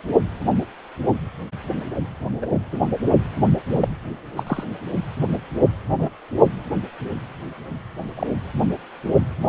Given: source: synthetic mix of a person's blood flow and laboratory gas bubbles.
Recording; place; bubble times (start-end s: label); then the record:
Doppler ultrasound of blood flow; precordium
2.42-2.46 s: bubbles
2.72-2.81 s: bubbles
3.68-3.89 s: bubbles
4.36-4.43 s: bubbles
4.46-4.64 s: bubbles
5.99-6.09 s: bubbles
8.16-8.27 s: bubbles
From the record:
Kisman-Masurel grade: 122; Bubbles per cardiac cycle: 1 to 2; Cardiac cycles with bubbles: 10 to 50%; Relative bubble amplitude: moderate (0.250 to 0.450); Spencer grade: 2 (many but less than half of the cardiac periods contain bubble signals, singularly or in groups); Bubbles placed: only in the low amplitude regions of the cardiac cycle